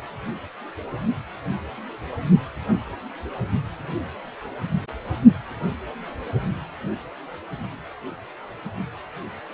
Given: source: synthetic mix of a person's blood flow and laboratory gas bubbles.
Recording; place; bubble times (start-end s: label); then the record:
Doppler ultrasound of blood flow; precordium
no bubbles
From the record:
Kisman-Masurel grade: 000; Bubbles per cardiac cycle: 0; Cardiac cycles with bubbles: 0%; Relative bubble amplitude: no bubbles discernible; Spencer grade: 0 (complete lack of bubble signals)